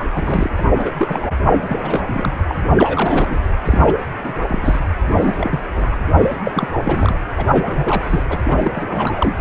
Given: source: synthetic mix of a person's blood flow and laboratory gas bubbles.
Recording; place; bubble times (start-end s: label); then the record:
Doppler ultrasound of blood flow; precordium
0.00-0.05 s: bubbles
0.14-0.51 s: bubbles
0.57-0.61 s: bubbles
0.77-0.92 s: bubbles
0.97-1.23 s: bubbles
1.51-2.04 s: bubbles
2.06-2.31 s: bubbles
2.48-2.56 s: bubbles
2.77-3.42 s: bubbles
3.65-3.81 s: bubbles
3.85-3.97 s: bubbles
4.24-4.34 s: bubbles
4.48-4.79 s: bubbles
5.17-5.60 s: bubbles
5.71-5.87 s: bubbles
5.92-5.97 s: bubbles
6.21-6.40 s: bubbles
6.45-6.69 s: bubbles
6.77-7.17 s: bubbles
7.37-7.46 s: bubbles
7.50-8.23 s: bubbles
8.29-8.37 s: bubbles
8.43-9.34 s: bubbles
From the record:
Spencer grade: 3 (all of the cardiac periods contain showers or single bubble signals, but not dominating or overriding the cardiac motion signals); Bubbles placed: anywhere in the cardiac cycle